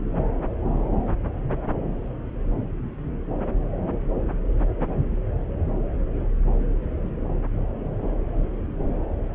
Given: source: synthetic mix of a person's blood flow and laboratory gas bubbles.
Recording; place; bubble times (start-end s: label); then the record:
Doppler ultrasound of blood flow; subclavian vein
no bubbles
From the record:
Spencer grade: 0 (complete lack of bubble signals)